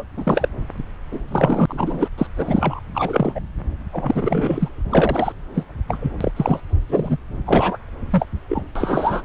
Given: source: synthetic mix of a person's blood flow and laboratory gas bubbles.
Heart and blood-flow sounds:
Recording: Doppler ultrasound of blood flow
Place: subclavian vein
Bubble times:
0.00-0.03 s: bubbles
0.17-0.48 s: bubbles
1.12-1.21 s: bubbles
1.27-1.66 s: bubbles
1.68-2.08 s: bubbles
2.18-2.27 s: bubbles
2.37-2.81 s: bubbles
2.94-3.41 s: bubbles
3.92-4.69 s: bubbles
4.90-5.33 s: bubbles
5.54-5.63 s: bubbles
5.88-6.11 s: bubbles
6.21-6.32 s: bubbles
6.36-6.60 s: bubbles
6.89-7.17 s: bubbles
7.46-7.77 s: bubbles
8.10-8.26 s: bubbles
8.49-8.63 s: bubbles
8.75-9.22 s: bubbles
From the record:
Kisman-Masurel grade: 243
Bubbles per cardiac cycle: several, 3 to 8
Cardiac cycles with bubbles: 100%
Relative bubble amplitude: loud (0.450 to 0.775)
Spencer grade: 3 (all of the cardiac periods contain showers or single bubble signals, but not dominating or overriding the cardiac motion signals)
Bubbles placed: anywhere in the cardiac cycle

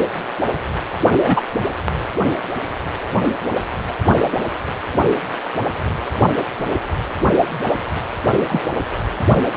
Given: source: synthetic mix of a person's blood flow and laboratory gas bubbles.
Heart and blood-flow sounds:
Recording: Doppler ultrasound of blood flow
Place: precordium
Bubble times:
1.19-1.41 s: bubbles
8.49-8.62 s: bubbles
From the record:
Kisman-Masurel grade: 123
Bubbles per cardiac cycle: 1 to 2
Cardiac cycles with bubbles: 10 to 50%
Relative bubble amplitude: loud (0.450 to 0.775)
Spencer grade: 2 (many but less than half of the cardiac periods contain bubble signals, singularly or in groups)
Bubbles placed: only in the low amplitude regions of the cardiac cycle

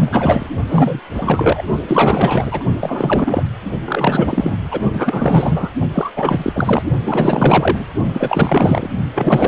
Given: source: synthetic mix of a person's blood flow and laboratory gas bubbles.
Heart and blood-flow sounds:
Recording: Doppler ultrasound of blood flow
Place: precordium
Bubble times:
0.00-0.48 s: bubbles
0.69-1.00 s: bubbles
1.14-1.62 s: bubbles
1.88-2.64 s: bubbles
2.80-3.46 s: bubbles
3.85-4.56 s: bubbles
4.71-4.80 s: bubbles
4.93-5.71 s: bubbles
5.93-6.11 s: bubbles
6.15-6.82 s: bubbles
7.05-7.85 s: bubbles
8.13-8.91 s: bubbles
9.14-9.48 s: bubbles
From the record:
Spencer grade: 4 (maximum detectable bubble signal sounding continuously throughout systole and diastole of every cardiac period, and overriding the amplitude of the normal cardiac signals)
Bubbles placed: only in the low amplitude regions of the cardiac cycle

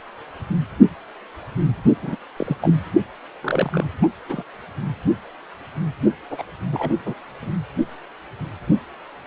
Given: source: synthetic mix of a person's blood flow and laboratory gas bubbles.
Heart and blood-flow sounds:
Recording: Doppler ultrasound of blood flow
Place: precordium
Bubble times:
2.01-2.16 s: bubbles
2.37-2.57 s: bubbles
2.62-2.75 s: bubbles
3.42-3.85 s: bubbles
4.02-4.08 s: bubbles
4.29-4.43 s: bubbles
6.30-6.43 s: bubbles
6.72-6.93 s: bubbles
7.05-7.14 s: bubbles
7.42-7.50 s: bubbles
From the record:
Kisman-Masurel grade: 222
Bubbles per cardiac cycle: several, 3 to 8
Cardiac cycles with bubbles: 10 to 50%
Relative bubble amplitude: moderate (0.250 to 0.450)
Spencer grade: 2 (many but less than half of the cardiac periods contain bubble signals, singularly or in groups)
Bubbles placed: anywhere in the cardiac cycle

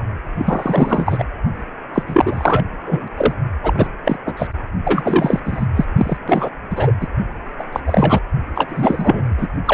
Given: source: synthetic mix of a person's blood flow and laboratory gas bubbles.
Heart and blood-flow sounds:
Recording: Doppler ultrasound of blood flow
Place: precordium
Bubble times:
0.38-1.24 s: bubbles
1.93-2.03 s: bubbles
2.07-2.64 s: bubbles
2.86-3.08 s: bubbles
3.17-3.34 s: bubbles
3.62-3.90 s: bubbles
4.04-4.17 s: bubbles
4.25-4.33 s: bubbles
4.37-4.47 s: bubbles
4.84-5.40 s: bubbles
5.45-5.66 s: bubbles
5.75-5.84 s: bubbles
5.97-6.17 s: bubbles
6.28-6.50 s: bubbles
6.70-6.92 s: bubbles
7.00-7.08 s: bubbles
7.59-7.64 s: bubbles
7.72-7.80 s: bubbles
7.86-8.20 s: bubbles
8.55-9.47 s: bubbles
9.65-9.74 s: bubbles
From the record:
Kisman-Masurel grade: 343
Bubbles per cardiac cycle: rolling drumbeat, 9 or more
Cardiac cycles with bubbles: 100%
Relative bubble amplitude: loud (0.450 to 0.775)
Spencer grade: 3 (all of the cardiac periods contain showers or single bubble signals, but not dominating or overriding the cardiac motion signals)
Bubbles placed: only in the low amplitude regions of the cardiac cycle

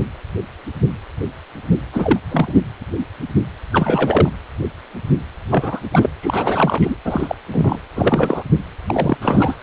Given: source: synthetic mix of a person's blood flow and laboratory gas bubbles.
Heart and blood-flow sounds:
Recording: Doppler ultrasound of blood flow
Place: precordium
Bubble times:
1.92-2.19 s: bubbles
2.28-2.54 s: bubbles
3.72-4.29 s: bubbles
5.49-5.80 s: bubbles
5.91-6.09 s: bubbles
6.22-6.94 s: bubbles
7.04-7.35 s: bubbles
7.51-7.79 s: bubbles
7.95-8.43 s: bubbles
8.88-9.17 s: bubbles
9.21-9.56 s: bubbles
From the record:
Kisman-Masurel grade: 233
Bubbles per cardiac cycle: several, 3 to 8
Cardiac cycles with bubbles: 50 to 99%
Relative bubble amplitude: loud (0.450 to 0.775)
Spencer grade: 3 (all of the cardiac periods contain showers or single bubble signals, but not dominating or overriding the cardiac motion signals)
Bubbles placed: anywhere in the cardiac cycle

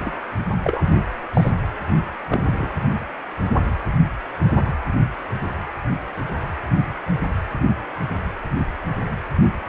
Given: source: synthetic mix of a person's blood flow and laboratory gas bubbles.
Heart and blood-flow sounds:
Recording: Doppler ultrasound of blood flow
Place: precordium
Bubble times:
0.00-0.18 s: bubbles
0.64-0.81 s: bubbles
1.34-1.51 s: bubbles
2.29-2.69 s: bubbles
From the record:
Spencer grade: 2 (many but less than half of the cardiac periods contain bubble signals, singularly or in groups)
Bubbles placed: anywhere in the cardiac cycle

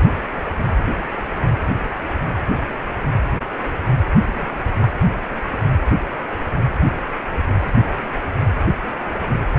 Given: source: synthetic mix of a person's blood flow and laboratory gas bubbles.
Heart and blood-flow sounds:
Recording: Doppler ultrasound of blood flow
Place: precordium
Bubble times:
4.26-4.62 s: bubbles
4.78-4.88 s: bubbles
From the record:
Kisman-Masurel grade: 211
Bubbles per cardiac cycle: several, 3 to 8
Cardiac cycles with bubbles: 1 to 10%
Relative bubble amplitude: barely perceptible (0.100 to 0.250)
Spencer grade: 1 (occasional bubble signal discernible with the cardiac motion signal, with majority of cardiac periods free of bubbles)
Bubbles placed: anywhere in the cardiac cycle

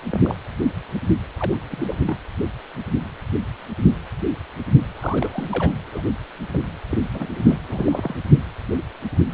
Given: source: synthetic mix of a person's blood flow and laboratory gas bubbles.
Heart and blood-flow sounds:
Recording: Doppler ultrasound of blood flow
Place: precordium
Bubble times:
0.11-0.35 s: bubbles
1.39-1.96 s: bubbles
2.06-2.17 s: bubbles
4.93-5.73 s: bubbles
5.87-6.02 s: bubbles
6.53-6.58 s: bubbles
6.90-6.97 s: bubbles
7.12-7.27 s: bubbles
7.34-7.57 s: bubbles
7.67-8.16 s: bubbles
From the record:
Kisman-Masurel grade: 221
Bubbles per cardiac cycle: several, 3 to 8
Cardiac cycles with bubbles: 10 to 50%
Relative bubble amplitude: barely perceptible (0.100 to 0.250)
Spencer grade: 2 (many but less than half of the cardiac periods contain bubble signals, singularly or in groups)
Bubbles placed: anywhere in the cardiac cycle

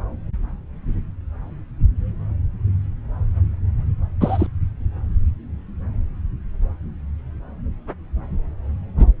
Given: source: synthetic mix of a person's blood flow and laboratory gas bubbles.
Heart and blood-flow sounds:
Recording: Doppler ultrasound of blood flow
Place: subclavian vein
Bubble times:
4.21-4.46 s: bubbles
From the record:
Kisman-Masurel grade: 113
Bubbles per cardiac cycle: 1 to 2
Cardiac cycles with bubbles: 1 to 10%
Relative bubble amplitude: loud (0.450 to 0.775)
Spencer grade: 1 (occasional bubble signal discernible with the cardiac motion signal, with majority of cardiac periods free of bubbles)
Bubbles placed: anywhere in the cardiac cycle

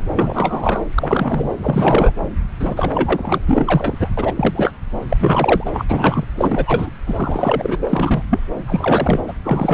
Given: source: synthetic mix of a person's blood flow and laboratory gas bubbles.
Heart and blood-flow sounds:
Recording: Doppler ultrasound of blood flow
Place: subclavian vein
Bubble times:
0.15-0.84 s: bubbles
0.98-1.50 s: bubbles
1.59-2.12 s: bubbles
2.60-3.40 s: bubbles
3.46-4.09 s: bubbles
4.17-4.33 s: bubbles
4.36-4.73 s: bubbles
5.09-5.70 s: bubbles
5.73-5.84 s: bubbles
5.88-6.24 s: bubbles
6.35-6.89 s: bubbles
7.06-7.77 s: bubbles
7.82-8.22 s: bubbles
8.30-8.40 s: bubbles
8.66-9.21 s: bubbles
9.28-9.33 s: bubbles
9.44-9.74 s: bubbles
From the record:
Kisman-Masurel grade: 333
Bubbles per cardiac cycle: rolling drumbeat, 9 or more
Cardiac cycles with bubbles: 50 to 99%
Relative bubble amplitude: loud (0.450 to 0.775)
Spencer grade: 3 (all of the cardiac periods contain showers or single bubble signals, but not dominating or overriding the cardiac motion signals)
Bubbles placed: anywhere in the cardiac cycle

